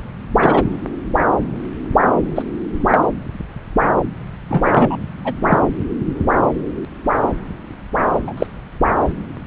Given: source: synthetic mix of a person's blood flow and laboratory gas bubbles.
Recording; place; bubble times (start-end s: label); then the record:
Doppler ultrasound of blood flow; subclavian vein
0.36-0.64 s: bubbles
2.35-2.42 s: bubbles
2.90-2.98 s: bubbles
4.49-4.96 s: bubbles
5.25-5.33 s: bubbles
5.47-5.58 s: bubbles
8.27-8.33 s: bubbles
8.37-8.46 s: bubbles
From the record:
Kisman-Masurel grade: 123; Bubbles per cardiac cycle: 1 to 2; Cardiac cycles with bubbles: 10 to 50%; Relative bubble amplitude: loud (0.450 to 0.775); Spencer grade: 2 (many but less than half of the cardiac periods contain bubble signals, singularly or in groups); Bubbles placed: anywhere in the cardiac cycle